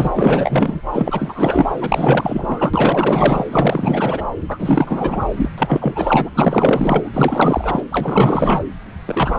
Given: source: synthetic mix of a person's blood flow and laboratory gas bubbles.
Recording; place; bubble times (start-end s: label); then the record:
Doppler ultrasound of blood flow; subclavian vein
0.00-0.11 s: bubbles
0.15-0.81 s: bubbles
0.93-1.72 s: bubbles
1.81-3.45 s: bubbles
3.50-4.25 s: bubbles
4.48-5.26 s: bubbles
5.29-5.50 s: bubbles
5.57-6.29 s: bubbles
6.35-7.09 s: bubbles
7.13-7.84 s: bubbles
7.91-8.63 s: bubbles
9.05-9.39 s: bubbles
From the record:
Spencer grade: 4 (maximum detectable bubble signal sounding continuously throughout systole and diastole of every cardiac period, and overriding the amplitude of the normal cardiac signals); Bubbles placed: anywhere in the cardiac cycle